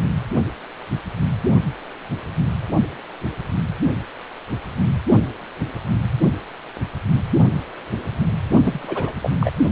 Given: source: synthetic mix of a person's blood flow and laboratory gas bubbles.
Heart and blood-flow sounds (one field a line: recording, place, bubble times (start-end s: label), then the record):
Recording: Doppler ultrasound of blood flow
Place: precordium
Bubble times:
8.63-9.12 s: bubbles
9.22-9.30 s: bubbles
9.40-9.50 s: bubbles
From the record:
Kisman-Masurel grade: 212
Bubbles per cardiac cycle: several, 3 to 8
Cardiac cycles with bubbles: 1 to 10%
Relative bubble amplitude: moderate (0.250 to 0.450)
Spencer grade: 1 (occasional bubble signal discernible with the cardiac motion signal, with majority of cardiac periods free of bubbles)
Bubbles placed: only in the low amplitude regions of the cardiac cycle